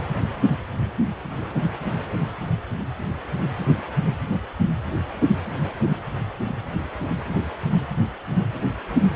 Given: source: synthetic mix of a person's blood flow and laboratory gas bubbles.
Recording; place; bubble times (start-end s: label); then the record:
Doppler ultrasound of blood flow; precordium
no bubbles
From the record:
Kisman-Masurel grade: 000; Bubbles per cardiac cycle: 0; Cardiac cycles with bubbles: 0%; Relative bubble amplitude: no bubbles discernible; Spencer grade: 0 (complete lack of bubble signals)